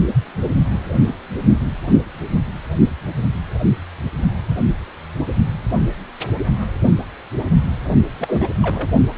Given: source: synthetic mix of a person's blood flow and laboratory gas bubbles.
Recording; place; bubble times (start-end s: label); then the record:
Doppler ultrasound of blood flow; precordium
8.19-8.48 s: bubbles
8.62-8.88 s: bubbles
From the record:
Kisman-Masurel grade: 222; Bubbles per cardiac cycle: several, 3 to 8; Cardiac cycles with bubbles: 10 to 50%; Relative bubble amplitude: moderate (0.250 to 0.450); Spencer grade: 2 (many but less than half of the cardiac periods contain bubble signals, singularly or in groups); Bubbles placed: only in the low amplitude regions of the cardiac cycle